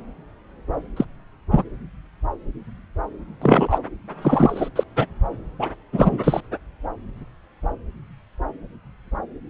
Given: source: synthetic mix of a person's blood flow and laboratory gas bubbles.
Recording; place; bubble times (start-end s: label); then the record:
Doppler ultrasound of blood flow; subclavian vein
0.96-1.04 s: bubbles
1.51-1.64 s: bubbles
3.42-3.79 s: bubbles
4.22-4.69 s: bubbles
4.76-4.83 s: bubbles
4.96-5.06 s: bubbles
5.58-5.69 s: bubbles
5.93-6.19 s: bubbles
6.24-6.41 s: bubbles
From the record:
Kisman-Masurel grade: 223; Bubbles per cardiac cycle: several, 3 to 8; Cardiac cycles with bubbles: 10 to 50%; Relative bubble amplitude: loud (0.450 to 0.775); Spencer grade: 2 (many but less than half of the cardiac periods contain bubble signals, singularly or in groups); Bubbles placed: anywhere in the cardiac cycle